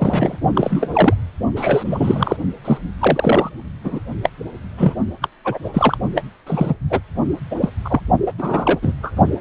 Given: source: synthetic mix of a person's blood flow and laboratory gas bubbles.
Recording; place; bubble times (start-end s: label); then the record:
Doppler ultrasound of blood flow; precordium
0.00-0.38 s: bubbles
0.54-0.89 s: bubbles
0.93-1.14 s: bubbles
1.56-2.38 s: bubbles
2.65-2.78 s: bubbles
3.00-3.50 s: bubbles
3.84-4.00 s: bubbles
4.22-4.29 s: bubbles
4.77-4.94 s: bubbles
5.22-5.28 s: bubbles
5.45-5.59 s: bubbles
5.64-5.70 s: bubbles
5.73-5.97 s: bubbles
6.14-6.22 s: bubbles
6.46-6.74 s: bubbles
6.90-7.01 s: bubbles
7.51-7.56 s: bubbles
7.61-7.70 s: bubbles
7.85-8.01 s: bubbles
8.27-8.33 s: bubbles
8.38-8.79 s: bubbles
8.82-8.94 s: bubbles
9.03-9.12 s: bubbles
From the record:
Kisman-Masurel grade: 243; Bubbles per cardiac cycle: several, 3 to 8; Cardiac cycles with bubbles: 100%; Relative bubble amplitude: loud (0.450 to 0.775); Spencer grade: 3 (all of the cardiac periods contain showers or single bubble signals, but not dominating or overriding the cardiac motion signals); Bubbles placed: only in the low amplitude regions of the cardiac cycle